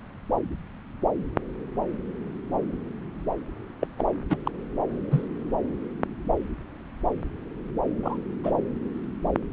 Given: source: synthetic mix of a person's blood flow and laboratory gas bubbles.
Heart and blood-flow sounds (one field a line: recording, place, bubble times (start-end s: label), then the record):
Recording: Doppler ultrasound of blood flow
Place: subclavian vein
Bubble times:
3.81-3.87 s: bubbles
3.98-4.05 s: bubbles
4.29-4.38 s: bubbles
4.46-4.51 s: bubbles
5.11-5.25 s: bubbles
8.03-8.17 s: bubbles
8.43-8.51 s: bubbles
From the record:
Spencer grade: 2 (many but less than half of the cardiac periods contain bubble signals, singularly or in groups)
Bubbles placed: anywhere in the cardiac cycle